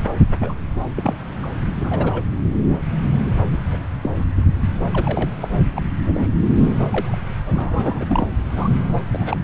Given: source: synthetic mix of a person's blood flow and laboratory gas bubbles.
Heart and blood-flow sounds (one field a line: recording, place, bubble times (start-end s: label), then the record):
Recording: Doppler ultrasound of blood flow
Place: subclavian vein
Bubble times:
0.42-0.54 s: bubbles
0.76-0.80 s: bubbles
0.96-1.16 s: bubbles
1.42-1.47 s: bubbles
1.80-2.24 s: bubbles
3.52-3.58 s: bubbles
3.69-3.84 s: bubbles
4.03-4.11 s: bubbles
4.15-4.25 s: bubbles
4.93-5.30 s: bubbles
5.41-5.50 s: bubbles
5.75-5.81 s: bubbles
6.14-6.27 s: bubbles
6.58-6.75 s: bubbles
6.79-6.87 s: bubbles
6.90-7.17 s: bubbles
7.55-8.05 s: bubbles
8.08-8.27 s: bubbles
8.55-8.69 s: bubbles
9.12-9.37 s: bubbles
From the record:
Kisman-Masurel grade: 242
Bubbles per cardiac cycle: several, 3 to 8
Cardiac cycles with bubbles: 100%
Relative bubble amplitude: moderate (0.250 to 0.450)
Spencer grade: 3 (all of the cardiac periods contain showers or single bubble signals, but not dominating or overriding the cardiac motion signals)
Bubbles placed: anywhere in the cardiac cycle